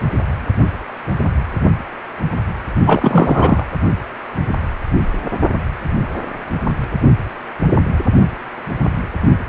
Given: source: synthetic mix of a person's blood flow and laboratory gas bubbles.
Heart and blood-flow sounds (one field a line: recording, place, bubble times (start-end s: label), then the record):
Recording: Doppler ultrasound of blood flow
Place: precordium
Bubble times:
2.85-3.65 s: bubbles
From the record:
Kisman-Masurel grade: 223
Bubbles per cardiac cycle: several, 3 to 8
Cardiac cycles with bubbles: 10 to 50%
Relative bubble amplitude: loud (0.450 to 0.775)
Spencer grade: 2 (many but less than half of the cardiac periods contain bubble signals, singularly or in groups)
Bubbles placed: only in the low amplitude regions of the cardiac cycle